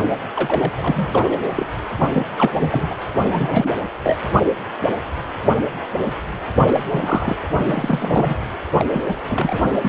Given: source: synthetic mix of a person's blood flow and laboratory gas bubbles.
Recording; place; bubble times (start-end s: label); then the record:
Doppler ultrasound of blood flow; precordium
0.34-0.72 s: bubbles
0.78-1.51 s: bubbles
1.55-1.66 s: bubbles
1.98-2.06 s: bubbles
2.12-2.26 s: bubbles
2.38-2.52 s: bubbles
2.54-2.95 s: bubbles
3.19-3.72 s: bubbles
4.04-4.18 s: bubbles
6.54-6.84 s: bubbles
6.91-7.36 s: bubbles
7.58-8.36 s: bubbles
8.79-8.85 s: bubbles
8.92-9.01 s: bubbles
9.07-9.15 s: bubbles
9.29-9.62 s: bubbles
9.70-9.88 s: bubbles
From the record:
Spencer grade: 3 (all of the cardiac periods contain showers or single bubble signals, but not dominating or overriding the cardiac motion signals); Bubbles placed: anywhere in the cardiac cycle